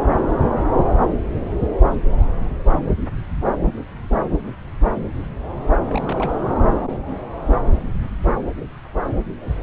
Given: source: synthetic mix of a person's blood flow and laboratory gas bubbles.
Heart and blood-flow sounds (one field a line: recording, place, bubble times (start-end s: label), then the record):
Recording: Doppler ultrasound of blood flow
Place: subclavian vein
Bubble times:
5.88-6.36 s: bubbles
From the record:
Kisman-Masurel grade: 211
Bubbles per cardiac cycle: several, 3 to 8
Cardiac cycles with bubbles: 1 to 10%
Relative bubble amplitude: barely perceptible (0.100 to 0.250)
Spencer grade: 1 (occasional bubble signal discernible with the cardiac motion signal, with majority of cardiac periods free of bubbles)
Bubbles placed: anywhere in the cardiac cycle